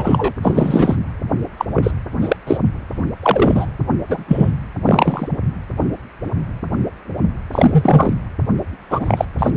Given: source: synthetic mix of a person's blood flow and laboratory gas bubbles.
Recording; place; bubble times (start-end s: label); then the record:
Doppler ultrasound of blood flow; precordium
0.00-0.33 s: bubbles
0.42-0.97 s: bubbles
1.57-1.65 s: bubbles
1.74-1.91 s: bubbles
2.21-2.36 s: bubbles
2.47-2.57 s: bubbles
3.22-3.66 s: bubbles
4.08-4.25 s: bubbles
4.28-4.52 s: bubbles
4.85-5.29 s: bubbles
7.53-8.13 s: bubbles
8.90-9.25 s: bubbles
9.38-9.50 s: bubbles
From the record:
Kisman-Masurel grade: 233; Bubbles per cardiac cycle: several, 3 to 8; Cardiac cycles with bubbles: 50 to 99%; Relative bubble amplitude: loud (0.450 to 0.775); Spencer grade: 3 (all of the cardiac periods contain showers or single bubble signals, but not dominating or overriding the cardiac motion signals); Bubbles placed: anywhere in the cardiac cycle